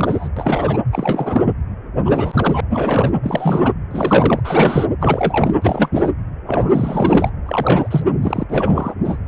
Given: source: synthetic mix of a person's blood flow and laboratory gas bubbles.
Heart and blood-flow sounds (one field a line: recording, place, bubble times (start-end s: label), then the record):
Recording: Doppler ultrasound of blood flow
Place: precordium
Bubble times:
0.00-0.28 s: bubbles
0.36-0.78 s: bubbles
0.92-1.54 s: bubbles
2.05-2.60 s: bubbles
2.70-3.11 s: bubbles
3.23-3.73 s: bubbles
3.90-4.40 s: bubbles
4.44-4.87 s: bubbles
5.00-5.55 s: bubbles
5.62-5.89 s: bubbles
5.91-6.11 s: bubbles
6.46-7.29 s: bubbles
7.46-8.01 s: bubbles
8.05-8.12 s: bubbles
8.22-8.43 s: bubbles
8.48-8.94 s: bubbles
9.04-9.18 s: bubbles
From the record:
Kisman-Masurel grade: 333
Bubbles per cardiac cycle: rolling drumbeat, 9 or more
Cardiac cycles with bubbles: 50 to 99%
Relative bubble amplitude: loud (0.450 to 0.775)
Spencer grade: 3 (all of the cardiac periods contain showers or single bubble signals, but not dominating or overriding the cardiac motion signals)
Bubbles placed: anywhere in the cardiac cycle